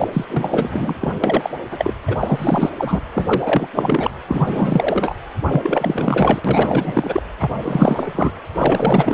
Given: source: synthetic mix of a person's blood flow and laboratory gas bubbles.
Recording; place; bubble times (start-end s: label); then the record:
Doppler ultrasound of blood flow; precordium
0.00-0.08 s: bubbles
0.13-0.24 s: bubbles
0.29-1.14 s: bubbles
1.24-1.50 s: bubbles
1.71-1.94 s: bubbles
2.07-2.71 s: bubbles
2.78-3.00 s: bubbles
3.14-3.68 s: bubbles
3.75-4.11 s: bubbles
4.28-5.15 s: bubbles
5.46-6.41 s: bubbles
6.45-7.22 s: bubbles
7.39-7.51 s: bubbles
7.63-8.31 s: bubbles
8.57-9.14 s: bubbles
From the record:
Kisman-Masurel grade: 444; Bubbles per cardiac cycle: continuous sound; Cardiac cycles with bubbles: 100%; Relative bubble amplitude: maximal (0.775 to 0.999); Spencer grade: 4 (maximum detectable bubble signal sounding continuously throughout systole and diastole of every cardiac period, and overriding the amplitude of the normal cardiac signals); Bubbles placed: anywhere in the cardiac cycle